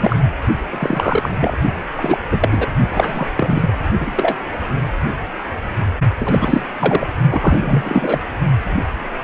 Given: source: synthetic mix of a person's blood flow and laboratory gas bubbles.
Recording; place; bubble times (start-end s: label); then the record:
Doppler ultrasound of blood flow; precordium
0.00-0.16 s: bubbles
0.71-1.29 s: bubbles
1.40-1.56 s: bubbles
1.97-2.18 s: bubbles
2.30-2.68 s: bubbles
2.92-3.28 s: bubbles
3.37-3.79 s: bubbles
3.99-4.37 s: bubbles
6.17-6.65 s: bubbles
6.79-7.08 s: bubbles
7.30-8.19 s: bubbles
From the record:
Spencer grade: 3 (all of the cardiac periods contain showers or single bubble signals, but not dominating or overriding the cardiac motion signals); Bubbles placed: only in the low amplitude regions of the cardiac cycle